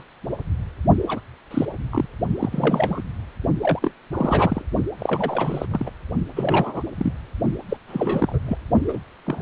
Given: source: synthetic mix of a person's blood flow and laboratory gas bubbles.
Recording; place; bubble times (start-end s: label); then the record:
Doppler ultrasound of blood flow; precordium
0.00-0.03 s: bubbles
1.07-1.20 s: bubbles
1.50-1.66 s: bubbles
1.90-2.06 s: bubbles
2.39-3.02 s: bubbles
3.61-3.79 s: bubbles
3.82-3.91 s: bubbles
4.12-4.62 s: bubbles
4.99-5.66 s: bubbles
5.71-5.89 s: bubbles
6.36-6.83 s: bubbles
6.95-7.13 s: bubbles
7.68-7.77 s: bubbles
7.87-8.39 s: bubbles
8.46-8.58 s: bubbles
8.88-8.99 s: bubbles
9.26-9.42 s: bubbles
From the record:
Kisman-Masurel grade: 242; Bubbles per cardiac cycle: several, 3 to 8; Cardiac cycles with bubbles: 100%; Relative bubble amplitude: moderate (0.250 to 0.450); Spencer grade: 3 (all of the cardiac periods contain showers or single bubble signals, but not dominating or overriding the cardiac motion signals); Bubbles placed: only in the low amplitude regions of the cardiac cycle